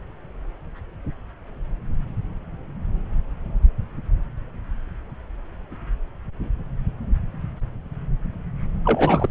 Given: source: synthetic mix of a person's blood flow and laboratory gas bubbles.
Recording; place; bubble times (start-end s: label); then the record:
Doppler ultrasound of blood flow; subclavian vein
8.83-9.29 s: bubbles
From the record:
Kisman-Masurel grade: 212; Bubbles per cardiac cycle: several, 3 to 8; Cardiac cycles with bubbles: 1 to 10%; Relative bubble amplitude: moderate (0.250 to 0.450); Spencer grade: 1 (occasional bubble signal discernible with the cardiac motion signal, with majority of cardiac periods free of bubbles); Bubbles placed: anywhere in the cardiac cycle